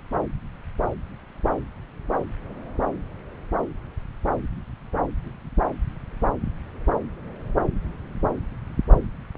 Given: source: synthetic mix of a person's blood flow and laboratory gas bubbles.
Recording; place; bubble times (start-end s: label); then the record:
Doppler ultrasound of blood flow; subclavian vein
no bubbles
From the record:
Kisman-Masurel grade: 000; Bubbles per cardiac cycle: 0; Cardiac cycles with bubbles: 0%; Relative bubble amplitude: no bubbles discernible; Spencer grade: 0 (complete lack of bubble signals)